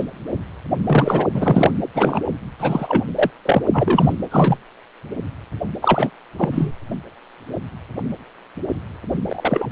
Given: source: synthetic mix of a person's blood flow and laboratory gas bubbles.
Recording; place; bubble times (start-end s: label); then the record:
Doppler ultrasound of blood flow; precordium
0.00-0.04 s: bubbles
0.87-1.27 s: bubbles
1.34-1.71 s: bubbles
1.94-2.22 s: bubbles
2.59-3.03 s: bubbles
3.15-3.30 s: bubbles
3.45-3.62 s: bubbles
3.72-4.17 s: bubbles
4.31-4.57 s: bubbles
5.82-6.11 s: bubbles
6.37-6.71 s: bubbles
9.28-9.67 s: bubbles
From the record:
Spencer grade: 3 (all of the cardiac periods contain showers or single bubble signals, but not dominating or overriding the cardiac motion signals); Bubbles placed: anywhere in the cardiac cycle